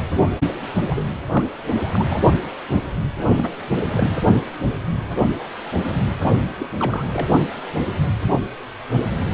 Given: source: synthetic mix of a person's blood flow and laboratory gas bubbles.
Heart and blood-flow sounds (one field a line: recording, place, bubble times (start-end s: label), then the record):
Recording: Doppler ultrasound of blood flow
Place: precordium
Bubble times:
0.89-1.04 s: bubbles
1.32-1.45 s: bubbles
1.75-2.20 s: bubbles
3.37-3.50 s: bubbles
3.84-4.22 s: bubbles
6.58-6.66 s: bubbles
6.78-7.05 s: bubbles
7.11-7.28 s: bubbles
From the record:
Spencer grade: 2 (many but less than half of the cardiac periods contain bubble signals, singularly or in groups)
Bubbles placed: only in the low amplitude regions of the cardiac cycle